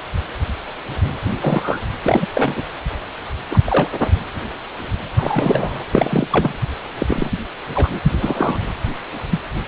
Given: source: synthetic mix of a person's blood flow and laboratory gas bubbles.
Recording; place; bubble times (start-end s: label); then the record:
Doppler ultrasound of blood flow; precordium
1.39-1.79 s: bubbles
2.06-2.27 s: bubbles
2.33-2.64 s: bubbles
3.50-3.89 s: bubbles
5.17-5.84 s: bubbles
5.91-6.27 s: bubbles
6.31-6.56 s: bubbles
6.98-7.29 s: bubbles
7.75-7.99 s: bubbles
8.21-8.59 s: bubbles
9.29-9.40 s: bubbles
From the record:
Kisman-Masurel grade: 232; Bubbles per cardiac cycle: several, 3 to 8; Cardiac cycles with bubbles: 50 to 99%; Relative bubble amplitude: moderate (0.250 to 0.450); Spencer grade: 3 (all of the cardiac periods contain showers or single bubble signals, but not dominating or overriding the cardiac motion signals); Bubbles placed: anywhere in the cardiac cycle